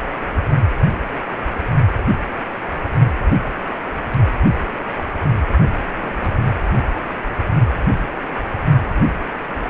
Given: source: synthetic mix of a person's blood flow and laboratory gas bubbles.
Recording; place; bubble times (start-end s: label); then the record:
Doppler ultrasound of blood flow; precordium
6.00-6.38 s: bubbles
From the record:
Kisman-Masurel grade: 111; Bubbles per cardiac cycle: 1 to 2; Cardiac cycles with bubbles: 1 to 10%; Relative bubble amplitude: barely perceptible (0.100 to 0.250); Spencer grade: 1 (occasional bubble signal discernible with the cardiac motion signal, with majority of cardiac periods free of bubbles); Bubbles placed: only in the low amplitude regions of the cardiac cycle